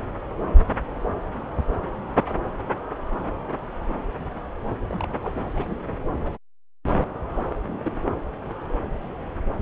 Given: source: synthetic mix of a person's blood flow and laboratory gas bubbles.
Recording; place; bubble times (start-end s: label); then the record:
Doppler ultrasound of blood flow; subclavian vein
4.91-5.35 s: bubbles
5.54-5.81 s: bubbles
7.68-8.02 s: bubbles
From the record:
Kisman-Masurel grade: 121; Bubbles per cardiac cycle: 1 to 2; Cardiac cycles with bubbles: 10 to 50%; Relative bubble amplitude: barely perceptible (0.100 to 0.250); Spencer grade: 2 (many but less than half of the cardiac periods contain bubble signals, singularly or in groups); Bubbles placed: anywhere in the cardiac cycle